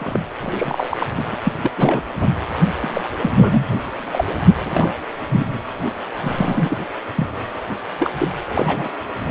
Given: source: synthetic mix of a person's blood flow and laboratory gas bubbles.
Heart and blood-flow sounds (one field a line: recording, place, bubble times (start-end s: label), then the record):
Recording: Doppler ultrasound of blood flow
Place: precordium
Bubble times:
0.00-0.20 s: bubbles
0.40-1.07 s: bubbles
1.15-1.37 s: bubbles
1.43-1.52 s: bubbles
1.62-1.72 s: bubbles
1.77-2.02 s: bubbles
2.21-2.29 s: bubbles
2.81-3.01 s: bubbles
3.22-3.67 s: bubbles
4.11-4.25 s: bubbles
4.61-4.94 s: bubbles
5.29-5.46 s: bubbles
6.21-6.78 s: bubbles
7.15-7.26 s: bubbles
7.99-8.10 s: bubbles
8.18-8.28 s: bubbles
8.49-8.89 s: bubbles
From the record:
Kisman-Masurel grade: 242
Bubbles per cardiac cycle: several, 3 to 8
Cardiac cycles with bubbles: 100%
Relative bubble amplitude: moderate (0.250 to 0.450)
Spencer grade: 3 (all of the cardiac periods contain showers or single bubble signals, but not dominating or overriding the cardiac motion signals)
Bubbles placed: anywhere in the cardiac cycle